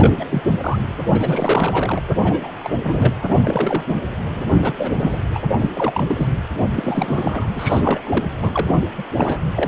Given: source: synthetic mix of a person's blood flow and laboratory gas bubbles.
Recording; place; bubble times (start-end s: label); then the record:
Doppler ultrasound of blood flow; precordium
0.00-0.26 s: bubbles
0.30-0.43 s: bubbles
0.60-0.79 s: bubbles
1.12-2.01 s: bubbles
2.23-2.52 s: bubbles
2.59-2.70 s: bubbles
2.82-3.86 s: bubbles
4.33-4.51 s: bubbles
4.54-4.73 s: bubbles
4.78-5.21 s: bubbles
5.35-5.39 s: bubbles
5.58-5.69 s: bubbles
5.75-6.33 s: bubbles
6.76-7.49 s: bubbles
7.51-8.01 s: bubbles
8.04-8.24 s: bubbles
8.42-8.85 s: bubbles
8.97-9.04 s: bubbles
9.12-9.43 s: bubbles
9.54-9.67 s: bubbles
From the record:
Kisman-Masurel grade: 342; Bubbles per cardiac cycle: rolling drumbeat, 9 or more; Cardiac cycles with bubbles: 100%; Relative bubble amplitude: moderate (0.250 to 0.450); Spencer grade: 3 (all of the cardiac periods contain showers or single bubble signals, but not dominating or overriding the cardiac motion signals); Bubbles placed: anywhere in the cardiac cycle